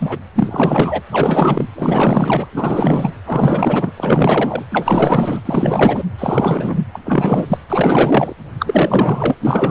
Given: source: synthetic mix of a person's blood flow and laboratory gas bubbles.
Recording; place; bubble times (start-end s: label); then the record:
Doppler ultrasound of blood flow; precordium
0.00-0.19 s: bubbles
0.35-1.02 s: bubbles
1.11-1.68 s: bubbles
1.75-2.47 s: bubbles
2.52-3.12 s: bubbles
3.25-3.92 s: bubbles
3.96-4.65 s: bubbles
4.71-5.41 s: bubbles
5.45-6.04 s: bubbles
6.18-6.81 s: bubbles
6.95-6.99 s: bubbles
7.06-7.58 s: bubbles
7.70-8.33 s: bubbles
8.58-9.35 s: bubbles
9.40-9.71 s: bubbles
From the record:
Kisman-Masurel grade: 444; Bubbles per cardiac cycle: continuous sound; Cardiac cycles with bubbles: 100%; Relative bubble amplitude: maximal (0.775 to 0.999); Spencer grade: 4 (maximum detectable bubble signal sounding continuously throughout systole and diastole of every cardiac period, and overriding the amplitude of the normal cardiac signals); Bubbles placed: anywhere in the cardiac cycle